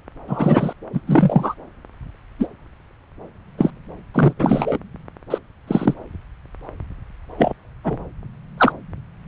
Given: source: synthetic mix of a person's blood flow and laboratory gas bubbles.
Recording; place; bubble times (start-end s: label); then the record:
Doppler ultrasound of blood flow; subclavian vein
0.28-0.73 s: bubbles
0.93-1.01 s: bubbles
1.07-1.54 s: bubbles
2.39-2.47 s: bubbles
3.58-3.71 s: bubbles
4.14-4.33 s: bubbles
4.39-4.79 s: bubbles
5.30-5.38 s: bubbles
5.67-5.94 s: bubbles
7.38-7.53 s: bubbles
7.84-8.04 s: bubbles
8.57-8.72 s: bubbles
From the record:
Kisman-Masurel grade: 243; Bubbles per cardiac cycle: several, 3 to 8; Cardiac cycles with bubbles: 100%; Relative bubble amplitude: loud (0.450 to 0.775); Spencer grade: 3 (all of the cardiac periods contain showers or single bubble signals, but not dominating or overriding the cardiac motion signals); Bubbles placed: anywhere in the cardiac cycle